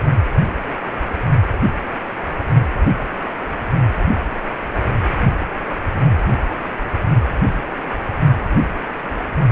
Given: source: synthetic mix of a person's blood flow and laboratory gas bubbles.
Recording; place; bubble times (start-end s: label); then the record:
Doppler ultrasound of blood flow; precordium
no bubbles
From the record:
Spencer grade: 0 (complete lack of bubble signals)